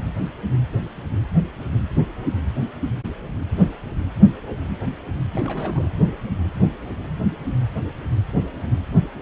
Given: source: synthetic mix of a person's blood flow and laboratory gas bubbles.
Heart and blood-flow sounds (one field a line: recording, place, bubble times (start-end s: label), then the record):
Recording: Doppler ultrasound of blood flow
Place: precordium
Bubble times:
5.31-5.89 s: bubbles
From the record:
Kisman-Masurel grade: 211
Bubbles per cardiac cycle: several, 3 to 8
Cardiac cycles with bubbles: 1 to 10%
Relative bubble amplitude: barely perceptible (0.100 to 0.250)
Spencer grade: 1 (occasional bubble signal discernible with the cardiac motion signal, with majority of cardiac periods free of bubbles)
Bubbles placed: anywhere in the cardiac cycle